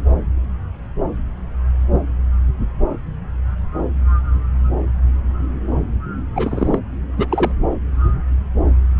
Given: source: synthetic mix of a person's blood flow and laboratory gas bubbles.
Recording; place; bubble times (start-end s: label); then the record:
Doppler ultrasound of blood flow; subclavian vein
6.35-6.79 s: bubbles
7.17-7.52 s: bubbles
From the record:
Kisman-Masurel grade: 212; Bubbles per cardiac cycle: several, 3 to 8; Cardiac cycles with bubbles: 1 to 10%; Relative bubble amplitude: moderate (0.250 to 0.450); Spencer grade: 1 (occasional bubble signal discernible with the cardiac motion signal, with majority of cardiac periods free of bubbles); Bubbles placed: anywhere in the cardiac cycle